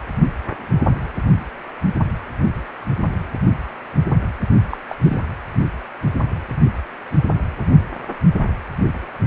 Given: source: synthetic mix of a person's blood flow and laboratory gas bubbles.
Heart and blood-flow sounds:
Doppler ultrasound of blood flow; precordium
4.70-4.78 s: bubbles
4.89-4.96 s: bubbles
5.03-5.19 s: bubbles
From the record:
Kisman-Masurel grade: 212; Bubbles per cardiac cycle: several, 3 to 8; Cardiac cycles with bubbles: 1 to 10%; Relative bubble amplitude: moderate (0.250 to 0.450); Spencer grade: 1 (occasional bubble signal discernible with the cardiac motion signal, with majority of cardiac periods free of bubbles); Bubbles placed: anywhere in the cardiac cycle

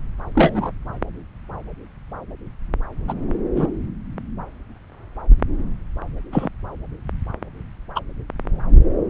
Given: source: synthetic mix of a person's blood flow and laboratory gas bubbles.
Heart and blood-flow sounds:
Doppler ultrasound of blood flow; subclavian vein
0.35-0.72 s: bubbles
3.08-3.14 s: bubbles
3.56-3.67 s: bubbles
6.32-6.49 s: bubbles
7.95-8.00 s: bubbles
From the record:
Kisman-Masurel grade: 123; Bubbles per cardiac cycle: 1 to 2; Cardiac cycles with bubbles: 10 to 50%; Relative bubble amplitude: loud (0.450 to 0.775); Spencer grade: 2 (many but less than half of the cardiac periods contain bubble signals, singularly or in groups); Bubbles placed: anywhere in the cardiac cycle

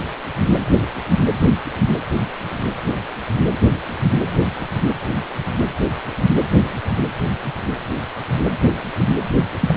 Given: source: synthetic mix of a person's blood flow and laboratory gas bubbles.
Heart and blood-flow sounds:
Doppler ultrasound of blood flow; precordium
9.60-9.74 s: bubbles
From the record:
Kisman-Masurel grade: 113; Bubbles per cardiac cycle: 1 to 2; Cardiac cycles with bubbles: 1 to 10%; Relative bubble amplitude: loud (0.450 to 0.775); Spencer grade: 1 (occasional bubble signal discernible with the cardiac motion signal, with majority of cardiac periods free of bubbles); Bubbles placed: anywhere in the cardiac cycle

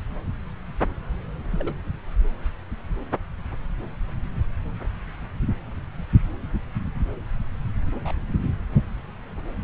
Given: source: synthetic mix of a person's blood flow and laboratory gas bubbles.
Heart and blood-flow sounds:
Doppler ultrasound of blood flow; subclavian vein
1.51-1.76 s: bubbles
7.90-8.12 s: bubbles
From the record:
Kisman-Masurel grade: 121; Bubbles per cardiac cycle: 1 to 2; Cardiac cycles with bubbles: 10 to 50%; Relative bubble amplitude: barely perceptible (0.100 to 0.250); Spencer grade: 2 (many but less than half of the cardiac periods contain bubble signals, singularly or in groups); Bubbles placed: anywhere in the cardiac cycle

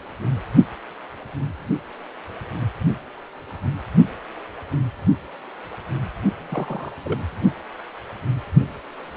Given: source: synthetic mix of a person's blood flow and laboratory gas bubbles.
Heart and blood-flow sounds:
Doppler ultrasound of blood flow; precordium
6.40-6.92 s: bubbles
7.04-7.20 s: bubbles
From the record:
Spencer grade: 2 (many but less than half of the cardiac periods contain bubble signals, singularly or in groups); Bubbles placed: only in the low amplitude regions of the cardiac cycle

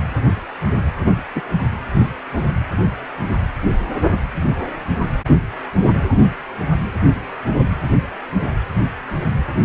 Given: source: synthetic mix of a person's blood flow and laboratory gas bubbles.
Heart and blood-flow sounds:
Doppler ultrasound of blood flow; precordium
1.35-1.42 s: bubbles
From the record:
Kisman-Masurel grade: 113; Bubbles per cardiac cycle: 1 to 2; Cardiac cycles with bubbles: 1 to 10%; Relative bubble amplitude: loud (0.450 to 0.775); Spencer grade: 1 (occasional bubble signal discernible with the cardiac motion signal, with majority of cardiac periods free of bubbles); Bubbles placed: anywhere in the cardiac cycle

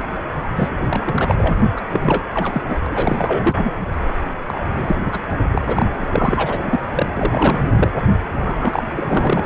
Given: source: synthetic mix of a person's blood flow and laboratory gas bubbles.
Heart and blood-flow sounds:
Doppler ultrasound of blood flow; precordium
0.55-0.70 s: bubbles
0.80-1.35 s: bubbles
1.38-1.56 s: bubbles
1.77-1.81 s: bubbles
1.88-2.25 s: bubbles
2.34-2.62 s: bubbles
2.67-2.78 s: bubbles
2.86-3.74 s: bubbles
4.47-4.61 s: bubbles
4.74-5.20 s: bubbles
5.51-5.84 s: bubbles
5.96-6.79 s: bubbles
6.93-7.09 s: bubbles
7.14-7.71 s: bubbles
7.75-7.89 s: bubbles
8.38-9.45 s: bubbles
From the record:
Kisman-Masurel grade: 342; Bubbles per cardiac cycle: rolling drumbeat, 9 or more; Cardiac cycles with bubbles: 100%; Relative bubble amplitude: moderate (0.250 to 0.450); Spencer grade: 3 (all of the cardiac periods contain showers or single bubble signals, but not dominating or overriding the cardiac motion signals); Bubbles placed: anywhere in the cardiac cycle

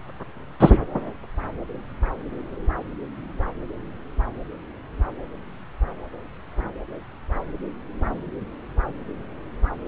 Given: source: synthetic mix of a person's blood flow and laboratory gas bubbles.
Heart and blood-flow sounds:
Doppler ultrasound of blood flow; subclavian vein
0.59-0.78 s: bubbles
From the record:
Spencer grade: 1 (occasional bubble signal discernible with the cardiac motion signal, with majority of cardiac periods free of bubbles); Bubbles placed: anywhere in the cardiac cycle

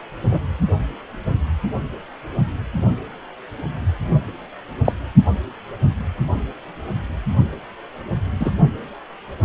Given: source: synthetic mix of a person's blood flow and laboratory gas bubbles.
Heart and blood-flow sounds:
Doppler ultrasound of blood flow; precordium
0.31-0.40 s: bubbles
4.84-4.92 s: bubbles
8.39-8.51 s: bubbles
From the record:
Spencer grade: 2 (many but less than half of the cardiac periods contain bubble signals, singularly or in groups); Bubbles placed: only in the low amplitude regions of the cardiac cycle

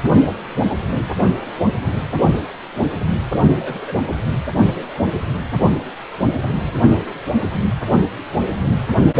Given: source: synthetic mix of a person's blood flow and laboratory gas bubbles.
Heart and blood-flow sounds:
Doppler ultrasound of blood flow; precordium
3.59-3.93 s: bubbles
From the record:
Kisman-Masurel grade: 111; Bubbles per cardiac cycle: 1 to 2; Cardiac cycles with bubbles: 1 to 10%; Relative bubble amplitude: barely perceptible (0.100 to 0.250); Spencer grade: 1 (occasional bubble signal discernible with the cardiac motion signal, with majority of cardiac periods free of bubbles); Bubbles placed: anywhere in the cardiac cycle

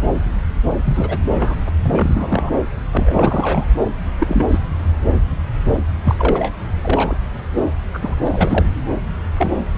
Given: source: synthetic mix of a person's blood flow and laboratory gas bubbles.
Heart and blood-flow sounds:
Doppler ultrasound of blood flow; subclavian vein
0.84-1.18 s: bubbles
1.34-1.55 s: bubbles
1.66-1.70 s: bubbles
1.82-2.51 s: bubbles
2.90-3.65 s: bubbles
4.18-4.61 s: bubbles
6.04-6.15 s: bubbles
6.18-6.52 s: bubbles
6.83-7.16 s: bubbles
7.94-7.99 s: bubbles
8.01-8.15 s: bubbles
8.25-8.70 s: bubbles
9.37-9.52 s: bubbles
From the record:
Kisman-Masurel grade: 242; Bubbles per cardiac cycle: several, 3 to 8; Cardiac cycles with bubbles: 100%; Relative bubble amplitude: moderate (0.250 to 0.450); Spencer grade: 3 (all of the cardiac periods contain showers or single bubble signals, but not dominating or overriding the cardiac motion signals); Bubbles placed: anywhere in the cardiac cycle

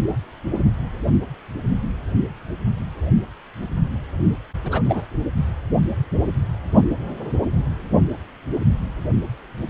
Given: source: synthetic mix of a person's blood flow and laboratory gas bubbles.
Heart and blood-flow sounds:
Doppler ultrasound of blood flow; precordium
4.63-4.82 s: bubbles
4.85-5.05 s: bubbles
From the record:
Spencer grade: 1 (occasional bubble signal discernible with the cardiac motion signal, with majority of cardiac periods free of bubbles); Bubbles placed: only in the low amplitude regions of the cardiac cycle

